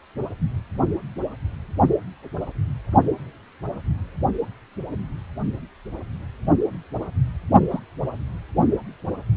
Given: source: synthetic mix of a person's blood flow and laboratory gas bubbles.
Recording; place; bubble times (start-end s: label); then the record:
Doppler ultrasound of blood flow; precordium
7.71-7.79 s: bubbles
From the record:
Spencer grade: 1 (occasional bubble signal discernible with the cardiac motion signal, with majority of cardiac periods free of bubbles); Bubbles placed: only in the low amplitude regions of the cardiac cycle